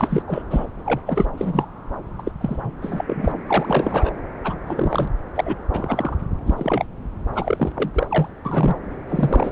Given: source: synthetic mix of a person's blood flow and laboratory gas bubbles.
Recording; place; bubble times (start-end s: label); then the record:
Doppler ultrasound of blood flow; subclavian vein
0.00-0.23 s: bubbles
0.28-0.43 s: bubbles
0.50-0.66 s: bubbles
0.85-1.00 s: bubbles
1.06-1.26 s: bubbles
1.38-1.65 s: bubbles
2.18-2.22 s: bubbles
2.25-2.32 s: bubbles
2.41-2.71 s: bubbles
2.82-3.39 s: bubbles
3.46-4.10 s: bubbles
4.44-4.55 s: bubbles
4.67-5.08 s: bubbles
5.34-5.56 s: bubbles
5.73-6.15 s: bubbles
6.46-6.85 s: bubbles
7.33-7.72 s: bubbles
7.75-7.91 s: bubbles
7.93-8.30 s: bubbles
8.45-8.77 s: bubbles
9.09-9.52 s: bubbles
From the record:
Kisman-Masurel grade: 242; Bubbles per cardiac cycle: several, 3 to 8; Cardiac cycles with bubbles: 100%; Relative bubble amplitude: moderate (0.250 to 0.450); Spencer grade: 3 (all of the cardiac periods contain showers or single bubble signals, but not dominating or overriding the cardiac motion signals); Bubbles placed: anywhere in the cardiac cycle